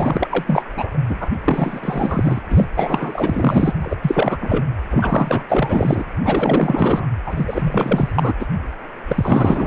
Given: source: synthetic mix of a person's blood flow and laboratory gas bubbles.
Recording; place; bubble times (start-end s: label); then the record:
Doppler ultrasound of blood flow; precordium
0.00-0.65 s: bubbles
0.76-0.97 s: bubbles
1.08-1.31 s: bubbles
1.44-2.41 s: bubbles
2.50-2.65 s: bubbles
2.74-3.75 s: bubbles
3.81-3.96 s: bubbles
4.02-4.38 s: bubbles
4.41-4.66 s: bubbles
4.89-5.43 s: bubbles
5.49-6.03 s: bubbles
6.23-7.05 s: bubbles
7.26-8.12 s: bubbles
8.14-8.33 s: bubbles
8.39-8.47 s: bubbles
9.08-9.67 s: bubbles
From the record:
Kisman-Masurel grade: 444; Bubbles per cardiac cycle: continuous sound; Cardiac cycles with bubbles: 100%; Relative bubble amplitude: maximal (0.775 to 0.999); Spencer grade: 4 (maximum detectable bubble signal sounding continuously throughout systole and diastole of every cardiac period, and overriding the amplitude of the normal cardiac signals); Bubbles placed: anywhere in the cardiac cycle